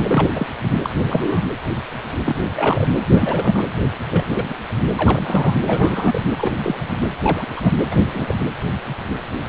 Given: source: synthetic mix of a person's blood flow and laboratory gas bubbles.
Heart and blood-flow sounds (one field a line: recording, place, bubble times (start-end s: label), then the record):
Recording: Doppler ultrasound of blood flow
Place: precordium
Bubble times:
0.07-0.28 s: bubbles
0.33-0.46 s: bubbles
0.82-0.90 s: bubbles
0.96-1.46 s: bubbles
2.25-2.48 s: bubbles
2.56-2.86 s: bubbles
3.08-3.65 s: bubbles
4.06-4.22 s: bubbles
4.29-4.54 s: bubbles
4.96-5.56 s: bubbles
5.65-6.19 s: bubbles
6.38-6.53 s: bubbles
6.63-6.98 s: bubbles
7.22-7.46 s: bubbles
7.56-7.72 s: bubbles
7.91-7.96 s: bubbles
8.14-8.35 s: bubbles
From the record:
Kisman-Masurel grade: 232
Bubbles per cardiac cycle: several, 3 to 8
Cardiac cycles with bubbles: 50 to 99%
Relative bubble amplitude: moderate (0.250 to 0.450)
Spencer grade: 3 (all of the cardiac periods contain showers or single bubble signals, but not dominating or overriding the cardiac motion signals)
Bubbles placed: anywhere in the cardiac cycle